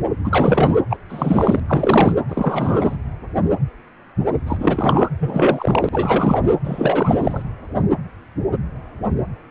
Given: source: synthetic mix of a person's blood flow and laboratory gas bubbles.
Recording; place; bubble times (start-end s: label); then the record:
Doppler ultrasound of blood flow; precordium
0.24-0.78 s: bubbles
0.90-0.97 s: bubbles
1.09-1.60 s: bubbles
1.68-2.16 s: bubbles
2.29-2.97 s: bubbles
4.46-5.08 s: bubbles
5.19-5.89 s: bubbles
5.92-6.41 s: bubbles
6.64-7.42 s: bubbles
From the record:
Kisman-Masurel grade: 333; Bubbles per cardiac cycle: rolling drumbeat, 9 or more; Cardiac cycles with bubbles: 50 to 99%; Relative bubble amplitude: loud (0.450 to 0.775); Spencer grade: 3 (all of the cardiac periods contain showers or single bubble signals, but not dominating or overriding the cardiac motion signals); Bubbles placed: anywhere in the cardiac cycle